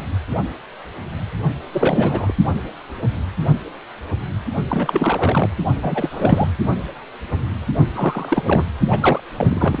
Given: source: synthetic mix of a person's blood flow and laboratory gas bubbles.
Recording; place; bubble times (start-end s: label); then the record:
Doppler ultrasound of blood flow; precordium
1.72-2.33 s: bubbles
4.68-5.50 s: bubbles
5.82-6.50 s: bubbles
7.92-8.66 s: bubbles
8.91-9.21 s: bubbles
9.37-9.79 s: bubbles
From the record:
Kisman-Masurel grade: 333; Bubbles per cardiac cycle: rolling drumbeat, 9 or more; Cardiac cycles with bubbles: 50 to 99%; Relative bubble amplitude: loud (0.450 to 0.775); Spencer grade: 3 (all of the cardiac periods contain showers or single bubble signals, but not dominating or overriding the cardiac motion signals); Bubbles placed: only in the low amplitude regions of the cardiac cycle